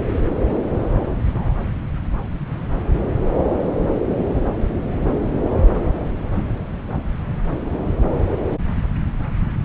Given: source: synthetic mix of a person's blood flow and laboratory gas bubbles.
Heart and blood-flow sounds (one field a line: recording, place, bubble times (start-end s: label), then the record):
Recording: Doppler ultrasound of blood flow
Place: subclavian vein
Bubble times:
1.16-1.22 s: bubbles
1.24-1.57 s: bubbles
5.66-5.82 s: bubbles
From the record:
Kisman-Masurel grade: 121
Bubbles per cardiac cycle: 1 to 2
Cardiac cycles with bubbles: 10 to 50%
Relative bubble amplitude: barely perceptible (0.100 to 0.250)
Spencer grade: 2 (many but less than half of the cardiac periods contain bubble signals, singularly or in groups)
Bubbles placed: anywhere in the cardiac cycle